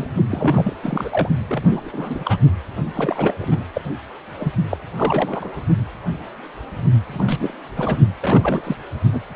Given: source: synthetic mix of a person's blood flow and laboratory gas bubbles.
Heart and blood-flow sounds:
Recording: Doppler ultrasound of blood flow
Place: precordium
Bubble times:
0.00-0.07 s: bubbles
0.31-0.73 s: bubbles
0.83-1.09 s: bubbles
1.12-1.29 s: bubbles
1.48-1.90 s: bubbles
1.93-2.39 s: bubbles
2.94-3.35 s: bubbles
3.39-3.63 s: bubbles
3.73-3.81 s: bubbles
4.38-4.53 s: bubbles
4.70-4.77 s: bubbles
4.97-5.63 s: bubbles
7.13-7.54 s: bubbles
7.76-7.98 s: bubbles
8.18-8.76 s: bubbles
9.12-9.21 s: bubbles
From the record:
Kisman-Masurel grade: 332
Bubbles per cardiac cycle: rolling drumbeat, 9 or more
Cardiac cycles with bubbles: 50 to 99%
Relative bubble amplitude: moderate (0.250 to 0.450)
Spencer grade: 3 (all of the cardiac periods contain showers or single bubble signals, but not dominating or overriding the cardiac motion signals)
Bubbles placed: only in the low amplitude regions of the cardiac cycle

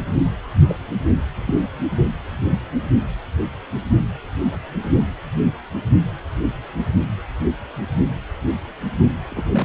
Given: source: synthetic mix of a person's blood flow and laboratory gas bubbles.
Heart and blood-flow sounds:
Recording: Doppler ultrasound of blood flow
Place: precordium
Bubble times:
0.68-0.78 s: bubbles
1.47-1.55 s: bubbles
8.04-8.10 s: bubbles
9.30-9.44 s: bubbles
9.53-9.65 s: bubbles
From the record:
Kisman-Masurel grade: 121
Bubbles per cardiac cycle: 1 to 2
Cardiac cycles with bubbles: 10 to 50%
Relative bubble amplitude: barely perceptible (0.100 to 0.250)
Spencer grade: 2 (many but less than half of the cardiac periods contain bubble signals, singularly or in groups)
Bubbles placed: only in the low amplitude regions of the cardiac cycle

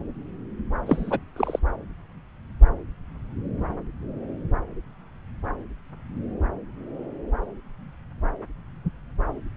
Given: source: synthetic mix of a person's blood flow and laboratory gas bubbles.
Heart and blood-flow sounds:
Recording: Doppler ultrasound of blood flow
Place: subclavian vein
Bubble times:
0.85-1.19 s: bubbles
1.36-1.59 s: bubbles
From the record:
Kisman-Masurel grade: 212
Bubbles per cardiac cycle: several, 3 to 8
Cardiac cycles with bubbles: 1 to 10%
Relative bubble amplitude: moderate (0.250 to 0.450)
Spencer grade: 1 (occasional bubble signal discernible with the cardiac motion signal, with majority of cardiac periods free of bubbles)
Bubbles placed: anywhere in the cardiac cycle

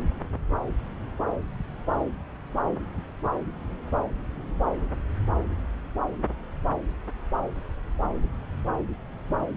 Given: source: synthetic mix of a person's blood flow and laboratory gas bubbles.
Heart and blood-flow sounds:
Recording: Doppler ultrasound of blood flow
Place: subclavian vein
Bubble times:
no bubbles
From the record:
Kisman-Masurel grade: 000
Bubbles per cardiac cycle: 0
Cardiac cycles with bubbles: 0%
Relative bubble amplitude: no bubbles discernible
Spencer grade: 0 (complete lack of bubble signals)

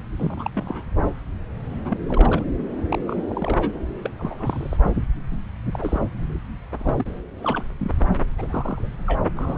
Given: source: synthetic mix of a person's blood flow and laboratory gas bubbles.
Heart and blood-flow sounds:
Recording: Doppler ultrasound of blood flow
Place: subclavian vein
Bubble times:
0.17-0.50 s: bubbles
0.54-0.83 s: bubbles
1.84-1.98 s: bubbles
2.08-2.44 s: bubbles
2.89-2.99 s: bubbles
3.07-3.80 s: bubbles
4.03-4.10 s: bubbles
4.19-4.77 s: bubbles
5.31-5.37 s: bubbles
5.72-5.99 s: bubbles
6.80-7.06 s: bubbles
7.43-7.64 s: bubbles
7.80-7.91 s: bubbles
8.38-8.89 s: bubbles
9.06-9.21 s: bubbles
9.36-9.58 s: bubbles
From the record:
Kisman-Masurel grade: 242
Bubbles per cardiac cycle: several, 3 to 8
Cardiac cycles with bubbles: 100%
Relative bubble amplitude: moderate (0.250 to 0.450)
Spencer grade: 3 (all of the cardiac periods contain showers or single bubble signals, but not dominating or overriding the cardiac motion signals)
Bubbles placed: anywhere in the cardiac cycle

